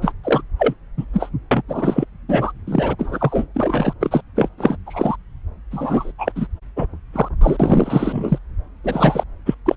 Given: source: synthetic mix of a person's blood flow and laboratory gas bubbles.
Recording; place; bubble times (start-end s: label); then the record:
Doppler ultrasound of blood flow; subclavian vein
0.01-0.12 s: bubbles
0.23-0.42 s: bubbles
0.58-0.74 s: bubbles
0.97-1.05 s: bubbles
1.13-1.29 s: bubbles
1.51-1.62 s: bubbles
1.68-2.05 s: bubbles
2.29-2.52 s: bubbles
2.67-2.96 s: bubbles
2.99-3.47 s: bubbles
3.54-3.94 s: bubbles
4.00-4.21 s: bubbles
4.35-4.48 s: bubbles
4.57-4.77 s: bubbles
4.86-5.17 s: bubbles
5.71-6.12 s: bubbles
6.18-6.32 s: bubbles
6.35-6.47 s: bubbles
6.76-6.86 s: bubbles
7.13-7.28 s: bubbles
7.41-7.57 s: bubbles
7.59-8.38 s: bubbles
8.84-9.24 s: bubbles
9.46-9.54 s: bubbles
9.66-9.77 s: bubbles
From the record:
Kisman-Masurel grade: 343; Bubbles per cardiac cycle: rolling drumbeat, 9 or more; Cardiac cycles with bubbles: 100%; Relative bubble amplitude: loud (0.450 to 0.775); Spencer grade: 3 (all of the cardiac periods contain showers or single bubble signals, but not dominating or overriding the cardiac motion signals); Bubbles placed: anywhere in the cardiac cycle